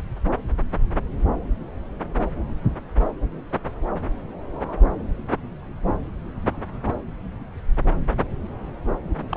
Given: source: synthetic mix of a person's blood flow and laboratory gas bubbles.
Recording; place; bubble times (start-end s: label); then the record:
Doppler ultrasound of blood flow; subclavian vein
9.29-9.37 s: bubbles
From the record:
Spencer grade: 1 (occasional bubble signal discernible with the cardiac motion signal, with majority of cardiac periods free of bubbles); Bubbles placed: anywhere in the cardiac cycle